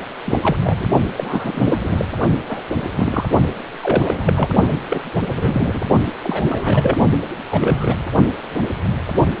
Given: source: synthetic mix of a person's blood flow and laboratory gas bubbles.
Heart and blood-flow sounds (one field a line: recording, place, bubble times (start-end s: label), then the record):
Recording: Doppler ultrasound of blood flow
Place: precordium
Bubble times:
0.25-0.39 s: bubbles
0.41-0.56 s: bubbles
0.60-0.87 s: bubbles
1.18-1.80 s: bubbles
1.83-2.05 s: bubbles
2.49-2.63 s: bubbles
2.96-3.24 s: bubbles
3.83-4.49 s: bubbles
4.90-5.00 s: bubbles
5.35-5.81 s: bubbles
6.06-6.12 s: bubbles
6.24-6.98 s: bubbles
7.50-7.95 s: bubbles
From the record:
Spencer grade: 3 (all of the cardiac periods contain showers or single bubble signals, but not dominating or overriding the cardiac motion signals)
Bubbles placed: only in the low amplitude regions of the cardiac cycle